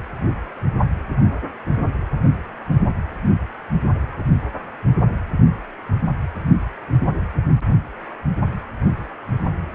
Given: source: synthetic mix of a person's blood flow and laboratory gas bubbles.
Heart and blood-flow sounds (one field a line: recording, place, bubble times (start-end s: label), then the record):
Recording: Doppler ultrasound of blood flow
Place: precordium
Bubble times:
no bubbles
From the record:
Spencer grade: 0 (complete lack of bubble signals)